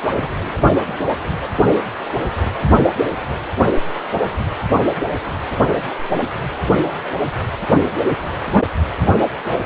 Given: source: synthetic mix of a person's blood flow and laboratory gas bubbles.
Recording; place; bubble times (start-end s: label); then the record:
Doppler ultrasound of blood flow; precordium
0.19-0.30 s: bubbles
0.39-0.43 s: bubbles
From the record:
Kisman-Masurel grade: 211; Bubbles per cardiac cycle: several, 3 to 8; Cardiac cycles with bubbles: 1 to 10%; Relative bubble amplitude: barely perceptible (0.100 to 0.250); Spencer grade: 1 (occasional bubble signal discernible with the cardiac motion signal, with majority of cardiac periods free of bubbles); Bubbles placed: anywhere in the cardiac cycle